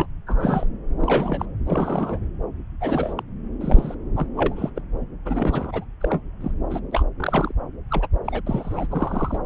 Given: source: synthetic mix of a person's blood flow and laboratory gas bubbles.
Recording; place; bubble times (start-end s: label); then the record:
Doppler ultrasound of blood flow; subclavian vein
0.00-0.06 s: bubbles
0.27-0.68 s: bubbles
1.00-1.55 s: bubbles
1.67-2.19 s: bubbles
2.81-3.14 s: bubbles
3.17-3.23 s: bubbles
3.60-3.95 s: bubbles
4.16-4.26 s: bubbles
4.35-4.70 s: bubbles
4.75-4.80 s: bubbles
5.25-5.84 s: bubbles
6.00-6.21 s: bubbles
6.41-6.51 s: bubbles
6.70-6.80 s: bubbles
6.91-7.03 s: bubbles
7.18-7.53 s: bubbles
7.90-8.07 s: bubbles
8.24-8.41 s: bubbles
8.46-8.87 s: bubbles
8.90-9.38 s: bubbles
From the record:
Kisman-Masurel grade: 232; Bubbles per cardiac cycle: several, 3 to 8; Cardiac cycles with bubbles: 50 to 99%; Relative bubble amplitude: moderate (0.250 to 0.450); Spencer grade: 3 (all of the cardiac periods contain showers or single bubble signals, but not dominating or overriding the cardiac motion signals); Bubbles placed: anywhere in the cardiac cycle